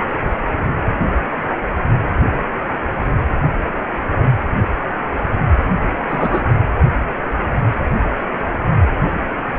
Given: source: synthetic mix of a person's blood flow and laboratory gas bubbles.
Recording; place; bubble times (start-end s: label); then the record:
Doppler ultrasound of blood flow; precordium
6.08-6.42 s: bubbles
From the record:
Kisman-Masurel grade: 113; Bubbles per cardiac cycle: 1 to 2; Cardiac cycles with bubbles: 1 to 10%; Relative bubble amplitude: loud (0.450 to 0.775); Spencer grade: 1 (occasional bubble signal discernible with the cardiac motion signal, with majority of cardiac periods free of bubbles); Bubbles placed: anywhere in the cardiac cycle